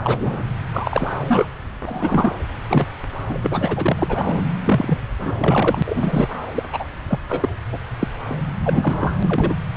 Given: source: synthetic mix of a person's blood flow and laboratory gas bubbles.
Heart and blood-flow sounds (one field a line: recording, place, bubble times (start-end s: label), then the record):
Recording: Doppler ultrasound of blood flow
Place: subclavian vein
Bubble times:
0.02-0.16 s: bubbles
0.19-0.43 s: bubbles
0.72-1.08 s: bubbles
1.27-1.48 s: bubbles
1.86-2.35 s: bubbles
2.69-2.86 s: bubbles
3.29-3.38 s: bubbles
3.42-4.45 s: bubbles
4.64-4.98 s: bubbles
5.21-5.33 s: bubbles
5.38-5.83 s: bubbles
5.87-6.27 s: bubbles
6.54-6.63 s: bubbles
6.72-6.85 s: bubbles
7.08-7.18 s: bubbles
7.29-7.49 s: bubbles
7.72-7.78 s: bubbles
7.99-8.07 s: bubbles
8.29-8.36 s: bubbles
8.63-9.15 s: bubbles
9.22-9.57 s: bubbles
From the record:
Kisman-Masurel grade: 243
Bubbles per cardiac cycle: several, 3 to 8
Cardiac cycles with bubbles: 100%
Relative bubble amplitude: loud (0.450 to 0.775)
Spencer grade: 3 (all of the cardiac periods contain showers or single bubble signals, but not dominating or overriding the cardiac motion signals)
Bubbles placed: anywhere in the cardiac cycle